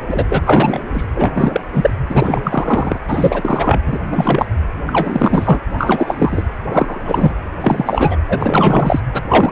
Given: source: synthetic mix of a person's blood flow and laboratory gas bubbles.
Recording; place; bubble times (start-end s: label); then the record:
Doppler ultrasound of blood flow; precordium
0.08-0.25 s: bubbles
0.29-0.42 s: bubbles
0.45-0.80 s: bubbles
0.94-1.05 s: bubbles
1.16-1.31 s: bubbles
1.35-1.61 s: bubbles
1.73-1.90 s: bubbles
2.10-2.98 s: bubbles
3.08-3.81 s: bubbles
3.86-3.98 s: bubbles
4.12-4.46 s: bubbles
4.87-5.60 s: bubbles
5.78-6.45 s: bubbles
6.70-7.34 s: bubbles
7.62-8.16 s: bubbles
8.29-9.00 s: bubbles
9.13-9.22 s: bubbles
9.29-9.51 s: bubbles
From the record:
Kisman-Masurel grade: 343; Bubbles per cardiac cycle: rolling drumbeat, 9 or more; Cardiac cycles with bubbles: 100%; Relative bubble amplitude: loud (0.450 to 0.775); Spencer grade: 3 (all of the cardiac periods contain showers or single bubble signals, but not dominating or overriding the cardiac motion signals); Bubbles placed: anywhere in the cardiac cycle